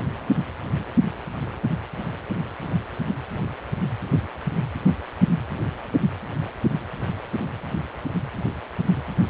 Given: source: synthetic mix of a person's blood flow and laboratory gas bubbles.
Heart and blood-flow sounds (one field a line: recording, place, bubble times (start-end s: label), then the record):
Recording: Doppler ultrasound of blood flow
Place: precordium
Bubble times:
no bubbles
From the record:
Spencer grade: 0 (complete lack of bubble signals)